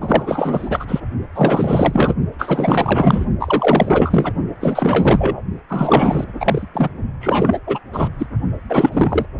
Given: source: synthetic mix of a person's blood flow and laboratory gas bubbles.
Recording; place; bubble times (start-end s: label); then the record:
Doppler ultrasound of blood flow; precordium
0.01-1.00 s: bubbles
1.34-2.15 s: bubbles
2.39-3.26 s: bubbles
3.40-4.33 s: bubbles
4.61-5.42 s: bubbles
5.69-6.25 s: bubbles
6.40-6.66 s: bubbles
6.74-6.89 s: bubbles
7.20-7.58 s: bubbles
7.67-7.79 s: bubbles
7.93-8.08 s: bubbles
8.19-8.27 s: bubbles
8.69-9.26 s: bubbles
From the record:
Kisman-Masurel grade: 444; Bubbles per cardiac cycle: continuous sound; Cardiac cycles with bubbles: 100%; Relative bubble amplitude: maximal (0.775 to 0.999); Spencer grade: 4 (maximum detectable bubble signal sounding continuously throughout systole and diastole of every cardiac period, and overriding the amplitude of the normal cardiac signals); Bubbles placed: only in the low amplitude regions of the cardiac cycle